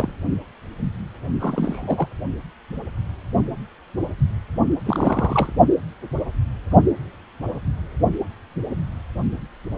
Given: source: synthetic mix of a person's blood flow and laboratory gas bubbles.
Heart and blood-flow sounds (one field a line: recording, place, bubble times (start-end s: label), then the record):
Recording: Doppler ultrasound of blood flow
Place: precordium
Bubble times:
0.00-0.12 s: bubbles
1.39-2.08 s: bubbles
4.85-5.53 s: bubbles
From the record:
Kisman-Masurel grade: 222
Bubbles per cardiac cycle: several, 3 to 8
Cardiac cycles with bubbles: 10 to 50%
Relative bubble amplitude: moderate (0.250 to 0.450)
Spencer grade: 2 (many but less than half of the cardiac periods contain bubble signals, singularly or in groups)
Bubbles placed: only in the low amplitude regions of the cardiac cycle